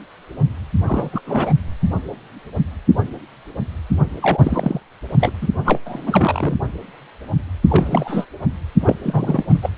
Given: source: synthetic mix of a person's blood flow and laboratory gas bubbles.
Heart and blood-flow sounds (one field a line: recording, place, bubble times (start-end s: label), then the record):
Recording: Doppler ultrasound of blood flow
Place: precordium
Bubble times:
0.86-1.09 s: bubbles
1.12-1.20 s: bubbles
1.26-1.52 s: bubbles
4.21-4.39 s: bubbles
4.42-4.80 s: bubbles
5.20-5.32 s: bubbles
5.42-5.46 s: bubbles
5.64-5.80 s: bubbles
5.85-6.54 s: bubbles
7.68-8.26 s: bubbles
8.80-8.96 s: bubbles
9.03-9.58 s: bubbles
9.62-9.70 s: bubbles
From the record:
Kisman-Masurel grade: 332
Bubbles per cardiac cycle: rolling drumbeat, 9 or more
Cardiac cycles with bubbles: 50 to 99%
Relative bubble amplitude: moderate (0.250 to 0.450)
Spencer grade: 3 (all of the cardiac periods contain showers or single bubble signals, but not dominating or overriding the cardiac motion signals)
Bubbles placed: anywhere in the cardiac cycle